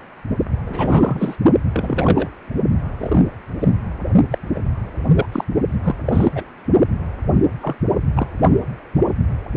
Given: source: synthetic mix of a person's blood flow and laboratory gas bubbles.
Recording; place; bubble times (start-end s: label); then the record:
Doppler ultrasound of blood flow; precordium
0.66-1.36 s: bubbles
1.72-2.29 s: bubbles
2.99-3.21 s: bubbles
3.60-3.68 s: bubbles
4.30-4.38 s: bubbles
4.54-4.59 s: bubbles
5.14-5.26 s: bubbles
5.32-5.44 s: bubbles
5.83-5.95 s: bubbles
6.05-6.29 s: bubbles
6.35-6.44 s: bubbles
7.61-7.75 s: bubbles
8.16-8.27 s: bubbles
From the record:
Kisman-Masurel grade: 233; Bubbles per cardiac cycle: several, 3 to 8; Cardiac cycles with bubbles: 50 to 99%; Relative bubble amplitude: loud (0.450 to 0.775); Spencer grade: 3 (all of the cardiac periods contain showers or single bubble signals, but not dominating or overriding the cardiac motion signals); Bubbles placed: only in the low amplitude regions of the cardiac cycle